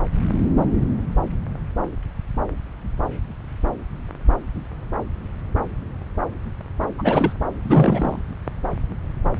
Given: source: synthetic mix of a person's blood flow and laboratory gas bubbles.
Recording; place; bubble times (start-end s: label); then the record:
Doppler ultrasound of blood flow; subclavian vein
6.98-7.34 s: bubbles
7.63-8.19 s: bubbles
From the record:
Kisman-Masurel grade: 222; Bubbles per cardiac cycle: several, 3 to 8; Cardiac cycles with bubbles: 10 to 50%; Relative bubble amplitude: moderate (0.250 to 0.450); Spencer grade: 2 (many but less than half of the cardiac periods contain bubble signals, singularly or in groups); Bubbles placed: anywhere in the cardiac cycle